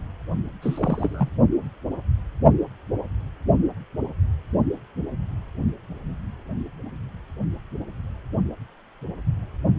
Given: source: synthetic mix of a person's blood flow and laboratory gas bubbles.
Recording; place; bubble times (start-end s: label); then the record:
Doppler ultrasound of blood flow; precordium
0.61-1.29 s: bubbles
From the record:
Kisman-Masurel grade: 212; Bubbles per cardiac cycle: several, 3 to 8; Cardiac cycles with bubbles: 1 to 10%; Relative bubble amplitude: moderate (0.250 to 0.450); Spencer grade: 1 (occasional bubble signal discernible with the cardiac motion signal, with majority of cardiac periods free of bubbles); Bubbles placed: only in the low amplitude regions of the cardiac cycle